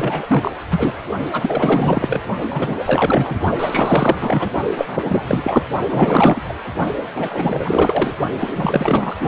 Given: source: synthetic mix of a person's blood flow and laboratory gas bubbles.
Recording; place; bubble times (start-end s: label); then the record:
Doppler ultrasound of blood flow; precordium
0.00-0.51 s: bubbles
0.70-0.94 s: bubbles
1.31-2.22 s: bubbles
2.50-2.75 s: bubbles
2.85-3.39 s: bubbles
3.58-4.51 s: bubbles
4.77-5.62 s: bubbles
5.89-6.41 s: bubbles
6.48-6.53 s: bubbles
7.14-8.16 s: bubbles
8.40-9.17 s: bubbles
9.20-9.28 s: bubbles
From the record:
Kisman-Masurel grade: 444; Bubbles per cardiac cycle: continuous sound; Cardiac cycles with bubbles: 100%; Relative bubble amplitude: maximal (0.775 to 0.999); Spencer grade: 4 (maximum detectable bubble signal sounding continuously throughout systole and diastole of every cardiac period, and overriding the amplitude of the normal cardiac signals); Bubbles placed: only in the low amplitude regions of the cardiac cycle